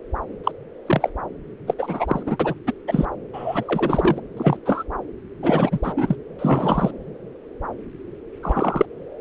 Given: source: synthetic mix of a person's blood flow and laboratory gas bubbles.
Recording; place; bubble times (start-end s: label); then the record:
Doppler ultrasound of blood flow; subclavian vein
0.43-0.52 s: bubbles
0.86-1.10 s: bubbles
1.67-1.74 s: bubbles
1.78-2.23 s: bubbles
2.26-2.37 s: bubbles
2.40-2.54 s: bubbles
2.67-2.73 s: bubbles
2.88-3.05 s: bubbles
3.33-4.20 s: bubbles
4.37-4.57 s: bubbles
4.65-4.83 s: bubbles
5.42-5.78 s: bubbles
5.82-5.93 s: bubbles
5.96-6.15 s: bubbles
6.38-6.91 s: bubbles
8.42-8.86 s: bubbles
From the record:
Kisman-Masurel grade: 233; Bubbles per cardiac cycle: several, 3 to 8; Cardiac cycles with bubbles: 50 to 99%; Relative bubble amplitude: loud (0.450 to 0.775); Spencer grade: 3 (all of the cardiac periods contain showers or single bubble signals, but not dominating or overriding the cardiac motion signals); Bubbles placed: anywhere in the cardiac cycle